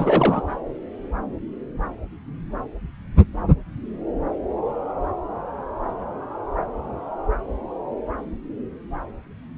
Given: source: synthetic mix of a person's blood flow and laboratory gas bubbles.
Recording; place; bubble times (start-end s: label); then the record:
Doppler ultrasound of blood flow; subclavian vein
0.00-0.41 s: bubbles
From the record:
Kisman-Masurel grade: 212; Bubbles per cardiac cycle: several, 3 to 8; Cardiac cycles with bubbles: 1 to 10%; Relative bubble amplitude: moderate (0.250 to 0.450); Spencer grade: 1 (occasional bubble signal discernible with the cardiac motion signal, with majority of cardiac periods free of bubbles); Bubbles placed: anywhere in the cardiac cycle